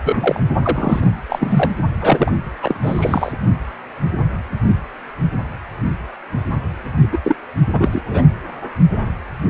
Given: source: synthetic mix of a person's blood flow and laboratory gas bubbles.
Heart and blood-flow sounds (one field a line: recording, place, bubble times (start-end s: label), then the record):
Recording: Doppler ultrasound of blood flow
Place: precordium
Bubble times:
0.04-0.40 s: bubbles
0.62-1.10 s: bubbles
1.28-1.74 s: bubbles
2.01-2.31 s: bubbles
2.62-3.32 s: bubbles
7.12-7.18 s: bubbles
7.24-7.36 s: bubbles
7.73-8.01 s: bubbles
8.10-8.22 s: bubbles
From the record:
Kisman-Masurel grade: 333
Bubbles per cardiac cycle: rolling drumbeat, 9 or more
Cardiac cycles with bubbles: 50 to 99%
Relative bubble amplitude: loud (0.450 to 0.775)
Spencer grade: 3 (all of the cardiac periods contain showers or single bubble signals, but not dominating or overriding the cardiac motion signals)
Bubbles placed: only in the low amplitude regions of the cardiac cycle